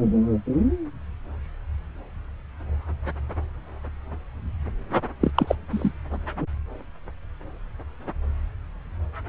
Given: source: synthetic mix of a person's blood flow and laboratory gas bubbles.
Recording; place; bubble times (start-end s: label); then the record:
Doppler ultrasound of blood flow; subclavian vein
5.21-5.31 s: bubbles
5.35-5.55 s: bubbles
5.71-5.92 s: bubbles
From the record:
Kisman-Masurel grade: 223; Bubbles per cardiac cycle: several, 3 to 8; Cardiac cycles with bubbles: 10 to 50%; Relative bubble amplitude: loud (0.450 to 0.775); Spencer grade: 2 (many but less than half of the cardiac periods contain bubble signals, singularly or in groups); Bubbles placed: anywhere in the cardiac cycle